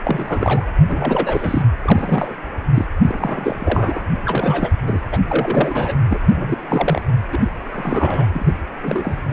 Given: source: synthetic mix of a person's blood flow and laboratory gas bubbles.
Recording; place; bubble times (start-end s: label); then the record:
Doppler ultrasound of blood flow; precordium
0.05-0.66 s: bubbles
0.88-1.62 s: bubbles
1.82-2.36 s: bubbles
2.74-2.86 s: bubbles
3.07-4.03 s: bubbles
4.25-4.76 s: bubbles
4.87-5.03 s: bubbles
5.11-5.21 s: bubbles
5.29-5.95 s: bubbles
6.10-6.19 s: bubbles
6.33-7.02 s: bubbles
7.32-7.51 s: bubbles
7.72-8.26 s: bubbles
8.32-8.52 s: bubbles
8.83-9.23 s: bubbles
9.28-9.33 s: bubbles
From the record:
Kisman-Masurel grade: 342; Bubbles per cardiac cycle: rolling drumbeat, 9 or more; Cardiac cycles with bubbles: 100%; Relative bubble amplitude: moderate (0.250 to 0.450); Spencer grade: 3 (all of the cardiac periods contain showers or single bubble signals, but not dominating or overriding the cardiac motion signals); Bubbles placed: anywhere in the cardiac cycle